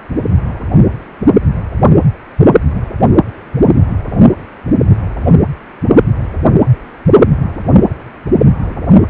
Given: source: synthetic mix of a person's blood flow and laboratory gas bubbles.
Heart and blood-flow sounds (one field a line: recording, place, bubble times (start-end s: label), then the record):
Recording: Doppler ultrasound of blood flow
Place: precordium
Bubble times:
7.85-8.04 s: bubbles
From the record:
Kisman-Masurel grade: 111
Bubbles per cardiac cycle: 1 to 2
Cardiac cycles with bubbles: 1 to 10%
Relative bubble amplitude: barely perceptible (0.100 to 0.250)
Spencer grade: 1 (occasional bubble signal discernible with the cardiac motion signal, with majority of cardiac periods free of bubbles)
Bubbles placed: anywhere in the cardiac cycle